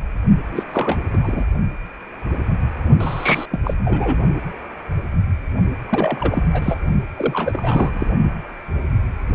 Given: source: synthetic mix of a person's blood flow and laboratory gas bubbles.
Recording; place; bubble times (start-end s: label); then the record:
Doppler ultrasound of blood flow; precordium
0.52-0.63 s: bubbles
0.73-0.98 s: bubbles
1.13-1.18 s: bubbles
1.23-1.45 s: bubbles
3.00-3.46 s: bubbles
3.51-3.59 s: bubbles
3.64-3.74 s: bubbles
3.85-4.20 s: bubbles
5.88-6.42 s: bubbles
6.52-6.77 s: bubbles
7.17-8.06 s: bubbles
From the record:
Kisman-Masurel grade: 332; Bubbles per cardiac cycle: rolling drumbeat, 9 or more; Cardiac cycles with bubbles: 50 to 99%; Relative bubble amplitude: moderate (0.250 to 0.450); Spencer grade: 3 (all of the cardiac periods contain showers or single bubble signals, but not dominating or overriding the cardiac motion signals); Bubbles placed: only in the low amplitude regions of the cardiac cycle